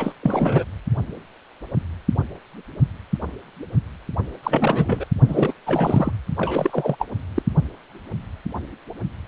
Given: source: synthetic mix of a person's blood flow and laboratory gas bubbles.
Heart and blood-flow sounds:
Doppler ultrasound of blood flow; precordium
0.00-0.12 s: bubbles
0.22-0.65 s: bubbles
4.43-5.04 s: bubbles
5.27-5.53 s: bubbles
5.67-6.11 s: bubbles
6.36-6.96 s: bubbles
6.99-7.06 s: bubbles
7.35-7.42 s: bubbles
From the record:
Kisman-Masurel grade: 332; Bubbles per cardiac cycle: rolling drumbeat, 9 or more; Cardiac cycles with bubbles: 50 to 99%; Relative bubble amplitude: moderate (0.250 to 0.450); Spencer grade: 3 (all of the cardiac periods contain showers or single bubble signals, but not dominating or overriding the cardiac motion signals); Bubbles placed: only in the low amplitude regions of the cardiac cycle

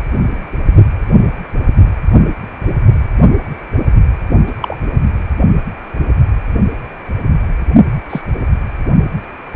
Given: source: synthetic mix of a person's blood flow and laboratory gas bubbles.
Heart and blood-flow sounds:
Doppler ultrasound of blood flow; precordium
4.46-4.53 s: bubbles
4.61-4.76 s: bubbles
8.09-8.21 s: bubbles
From the record:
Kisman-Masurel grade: 123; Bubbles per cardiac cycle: 1 to 2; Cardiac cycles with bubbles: 10 to 50%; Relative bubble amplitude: loud (0.450 to 0.775); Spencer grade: 2 (many but less than half of the cardiac periods contain bubble signals, singularly or in groups); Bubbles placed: only in the low amplitude regions of the cardiac cycle

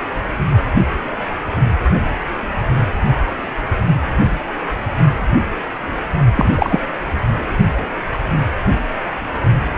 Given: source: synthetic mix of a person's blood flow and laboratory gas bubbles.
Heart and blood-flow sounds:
Doppler ultrasound of blood flow; precordium
6.35-6.50 s: bubbles
6.58-6.79 s: bubbles
From the record:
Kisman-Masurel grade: 213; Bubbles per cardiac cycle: several, 3 to 8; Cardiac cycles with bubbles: 1 to 10%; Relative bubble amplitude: loud (0.450 to 0.775); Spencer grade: 1 (occasional bubble signal discernible with the cardiac motion signal, with majority of cardiac periods free of bubbles); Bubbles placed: anywhere in the cardiac cycle

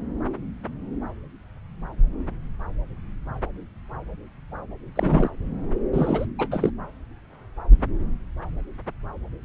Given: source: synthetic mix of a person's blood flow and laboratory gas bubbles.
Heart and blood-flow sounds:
Doppler ultrasound of blood flow; subclavian vein
4.96-5.31 s: bubbles
5.93-6.26 s: bubbles
6.39-6.49 s: bubbles
6.51-6.70 s: bubbles
From the record:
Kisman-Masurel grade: 222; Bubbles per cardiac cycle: several, 3 to 8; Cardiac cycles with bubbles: 10 to 50%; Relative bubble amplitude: moderate (0.250 to 0.450); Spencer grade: 2 (many but less than half of the cardiac periods contain bubble signals, singularly or in groups); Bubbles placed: anywhere in the cardiac cycle

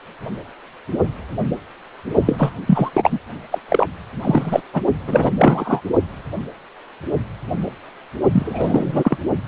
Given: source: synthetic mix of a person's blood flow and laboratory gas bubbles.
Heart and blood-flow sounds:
Doppler ultrasound of blood flow; precordium
2.26-2.52 s: bubbles
2.67-2.90 s: bubbles
2.93-3.19 s: bubbles
3.51-3.59 s: bubbles
3.69-3.87 s: bubbles
4.20-4.62 s: bubbles
4.73-4.81 s: bubbles
5.07-5.29 s: bubbles
5.36-5.81 s: bubbles
8.33-9.17 s: bubbles
From the record:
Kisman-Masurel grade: 333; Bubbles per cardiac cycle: rolling drumbeat, 9 or more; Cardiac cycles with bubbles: 50 to 99%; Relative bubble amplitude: loud (0.450 to 0.775); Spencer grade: 3 (all of the cardiac periods contain showers or single bubble signals, but not dominating or overriding the cardiac motion signals); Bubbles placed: only in the low amplitude regions of the cardiac cycle

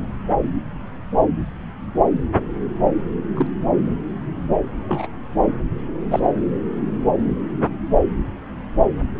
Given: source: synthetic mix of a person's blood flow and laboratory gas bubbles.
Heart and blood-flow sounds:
Doppler ultrasound of blood flow; subclavian vein
3.34-3.47 s: bubbles
4.89-5.07 s: bubbles
6.11-6.32 s: bubbles
From the record:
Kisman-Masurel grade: 122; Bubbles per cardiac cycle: 1 to 2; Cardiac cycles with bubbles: 10 to 50%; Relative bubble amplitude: moderate (0.250 to 0.450); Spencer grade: 2 (many but less than half of the cardiac periods contain bubble signals, singularly or in groups); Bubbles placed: anywhere in the cardiac cycle

